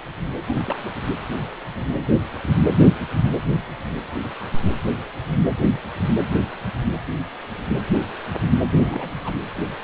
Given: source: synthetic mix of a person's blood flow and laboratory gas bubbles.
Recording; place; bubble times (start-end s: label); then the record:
Doppler ultrasound of blood flow; precordium
0.47-0.89 s: bubbles
8.72-9.12 s: bubbles
9.21-9.34 s: bubbles
From the record:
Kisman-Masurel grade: 211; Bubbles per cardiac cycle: several, 3 to 8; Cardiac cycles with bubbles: 1 to 10%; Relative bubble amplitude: barely perceptible (0.100 to 0.250); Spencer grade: 1 (occasional bubble signal discernible with the cardiac motion signal, with majority of cardiac periods free of bubbles); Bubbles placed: anywhere in the cardiac cycle